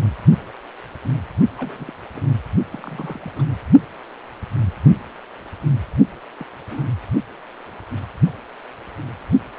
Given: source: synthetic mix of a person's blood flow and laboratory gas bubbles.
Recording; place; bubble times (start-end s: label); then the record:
Doppler ultrasound of blood flow; precordium
1.57-1.92 s: bubbles
2.14-2.23 s: bubbles
2.73-3.19 s: bubbles
3.22-3.32 s: bubbles
3.35-3.44 s: bubbles
6.39-6.45 s: bubbles
6.71-6.85 s: bubbles
From the record:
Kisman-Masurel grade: 221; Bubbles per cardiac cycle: several, 3 to 8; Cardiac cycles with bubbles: 10 to 50%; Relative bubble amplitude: barely perceptible (0.100 to 0.250); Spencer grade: 2 (many but less than half of the cardiac periods contain bubble signals, singularly or in groups); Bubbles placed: only in the low amplitude regions of the cardiac cycle